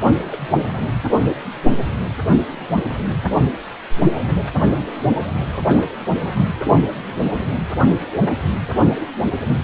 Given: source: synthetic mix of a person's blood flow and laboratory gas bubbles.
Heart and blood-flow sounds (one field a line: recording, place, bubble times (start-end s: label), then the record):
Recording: Doppler ultrasound of blood flow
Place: precordium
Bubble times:
0.00-0.26 s: bubbles
0.30-0.77 s: bubbles
2.18-2.42 s: bubbles
2.47-2.67 s: bubbles
2.73-2.83 s: bubbles
2.89-3.08 s: bubbles
5.55-5.92 s: bubbles
5.98-6.09 s: bubbles
6.16-6.53 s: bubbles
From the record:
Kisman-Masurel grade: 221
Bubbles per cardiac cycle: several, 3 to 8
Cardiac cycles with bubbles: 10 to 50%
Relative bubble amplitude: barely perceptible (0.100 to 0.250)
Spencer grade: 2 (many but less than half of the cardiac periods contain bubble signals, singularly or in groups)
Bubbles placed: anywhere in the cardiac cycle